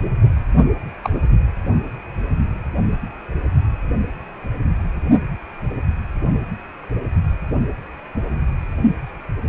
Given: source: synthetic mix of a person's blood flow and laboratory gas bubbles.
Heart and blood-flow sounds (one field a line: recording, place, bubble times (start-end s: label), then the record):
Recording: Doppler ultrasound of blood flow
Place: precordium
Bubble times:
1.03-1.10 s: bubbles
From the record:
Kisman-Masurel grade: 112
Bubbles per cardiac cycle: 1 to 2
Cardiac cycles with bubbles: 1 to 10%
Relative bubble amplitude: moderate (0.250 to 0.450)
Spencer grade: 1 (occasional bubble signal discernible with the cardiac motion signal, with majority of cardiac periods free of bubbles)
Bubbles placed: only in the low amplitude regions of the cardiac cycle